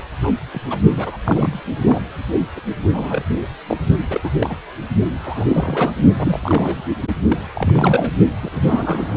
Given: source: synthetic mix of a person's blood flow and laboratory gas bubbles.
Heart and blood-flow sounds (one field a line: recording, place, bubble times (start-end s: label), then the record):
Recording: Doppler ultrasound of blood flow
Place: precordium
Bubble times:
0.22-0.30 s: bubbles
0.53-0.59 s: bubbles
0.69-0.79 s: bubbles
0.96-1.17 s: bubbles
1.24-1.60 s: bubbles
1.82-1.99 s: bubbles
2.56-2.60 s: bubbles
2.92-3.23 s: bubbles
3.68-3.77 s: bubbles
4.10-4.21 s: bubbles
4.23-4.30 s: bubbles
4.41-4.55 s: bubbles
5.23-5.96 s: bubbles
6.18-6.40 s: bubbles
6.43-6.88 s: bubbles
7.28-7.37 s: bubbles
7.54-8.16 s: bubbles
8.42-8.49 s: bubbles
8.52-9.17 s: bubbles
From the record:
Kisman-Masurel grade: 242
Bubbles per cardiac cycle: several, 3 to 8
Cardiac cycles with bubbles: 100%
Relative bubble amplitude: moderate (0.250 to 0.450)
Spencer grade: 3 (all of the cardiac periods contain showers or single bubble signals, but not dominating or overriding the cardiac motion signals)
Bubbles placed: only in the low amplitude regions of the cardiac cycle